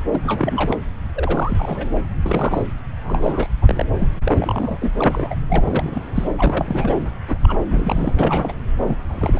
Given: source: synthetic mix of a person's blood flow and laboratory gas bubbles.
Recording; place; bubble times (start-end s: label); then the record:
Doppler ultrasound of blood flow; subclavian vein
0.10-0.77 s: bubbles
1.15-1.86 s: bubbles
2.25-2.63 s: bubbles
3.04-3.47 s: bubbles
3.62-3.83 s: bubbles
3.98-4.08 s: bubbles
4.24-4.93 s: bubbles
4.96-5.35 s: bubbles
5.49-6.01 s: bubbles
6.15-6.27 s: bubbles
6.38-6.95 s: bubbles
7.29-7.38 s: bubbles
7.43-7.58 s: bubbles
7.67-8.13 s: bubbles
8.18-8.52 s: bubbles
8.83-8.99 s: bubbles
9.08-9.40 s: bubbles
From the record:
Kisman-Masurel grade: 342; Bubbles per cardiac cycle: rolling drumbeat, 9 or more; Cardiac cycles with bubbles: 100%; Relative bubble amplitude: moderate (0.250 to 0.450); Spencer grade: 3 (all of the cardiac periods contain showers or single bubble signals, but not dominating or overriding the cardiac motion signals); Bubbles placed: anywhere in the cardiac cycle